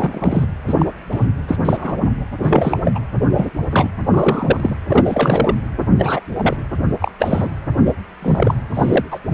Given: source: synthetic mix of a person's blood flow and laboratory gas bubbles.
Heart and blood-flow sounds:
Doppler ultrasound of blood flow; precordium
0.00-0.46 s: bubbles
0.67-0.74 s: bubbles
0.78-0.86 s: bubbles
1.11-1.27 s: bubbles
1.48-1.56 s: bubbles
1.65-1.96 s: bubbles
2.42-2.79 s: bubbles
2.85-3.00 s: bubbles
3.31-3.50 s: bubbles
3.69-3.90 s: bubbles
4.08-4.76 s: bubbles
4.89-5.55 s: bubbles
5.77-5.84 s: bubbles
5.98-6.20 s: bubbles
6.36-6.57 s: bubbles
7.00-7.12 s: bubbles
7.19-7.51 s: bubbles
7.85-7.92 s: bubbles
8.22-8.54 s: bubbles
8.74-9.05 s: bubbles
9.11-9.18 s: bubbles
9.32-9.34 s: bubbles
From the record:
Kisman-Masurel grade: 243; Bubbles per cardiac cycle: several, 3 to 8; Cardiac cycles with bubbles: 100%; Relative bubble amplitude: loud (0.450 to 0.775); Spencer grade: 3 (all of the cardiac periods contain showers or single bubble signals, but not dominating or overriding the cardiac motion signals); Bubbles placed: anywhere in the cardiac cycle

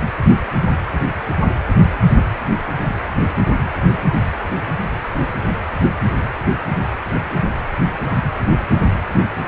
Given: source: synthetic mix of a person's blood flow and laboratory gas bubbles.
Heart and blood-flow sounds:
Doppler ultrasound of blood flow; precordium
2.16-2.24 s: bubbles
2.79-2.96 s: bubbles
From the record:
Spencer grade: 1 (occasional bubble signal discernible with the cardiac motion signal, with majority of cardiac periods free of bubbles); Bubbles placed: anywhere in the cardiac cycle

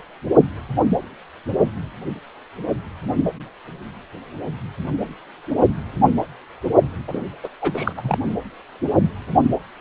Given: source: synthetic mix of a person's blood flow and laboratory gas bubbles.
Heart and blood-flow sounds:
Doppler ultrasound of blood flow; precordium
7.07-7.23 s: bubbles
7.43-7.48 s: bubbles
7.61-7.93 s: bubbles
7.96-8.17 s: bubbles
From the record:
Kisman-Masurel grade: 212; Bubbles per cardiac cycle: several, 3 to 8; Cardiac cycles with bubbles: 1 to 10%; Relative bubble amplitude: moderate (0.250 to 0.450); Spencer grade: 1 (occasional bubble signal discernible with the cardiac motion signal, with majority of cardiac periods free of bubbles); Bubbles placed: only in the low amplitude regions of the cardiac cycle

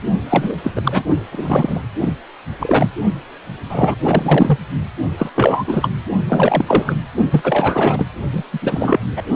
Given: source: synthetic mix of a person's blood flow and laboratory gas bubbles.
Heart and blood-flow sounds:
Doppler ultrasound of blood flow; precordium
0.29-0.57 s: bubbles
0.64-0.71 s: bubbles
0.75-0.81 s: bubbles
0.83-1.02 s: bubbles
1.31-1.80 s: bubbles
2.01-2.14 s: bubbles
2.59-2.88 s: bubbles
3.69-3.94 s: bubbles
4.04-4.59 s: bubbles
5.18-5.29 s: bubbles
5.35-5.64 s: bubbles
5.67-5.90 s: bubbles
6.29-6.94 s: bubbles
7.31-8.09 s: bubbles
8.32-8.44 s: bubbles
8.53-8.59 s: bubbles
8.62-8.99 s: bubbles
9.16-9.22 s: bubbles
From the record:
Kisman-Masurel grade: 343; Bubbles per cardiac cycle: rolling drumbeat, 9 or more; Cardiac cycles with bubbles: 100%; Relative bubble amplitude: loud (0.450 to 0.775); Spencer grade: 3 (all of the cardiac periods contain showers or single bubble signals, but not dominating or overriding the cardiac motion signals); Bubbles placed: only in the low amplitude regions of the cardiac cycle

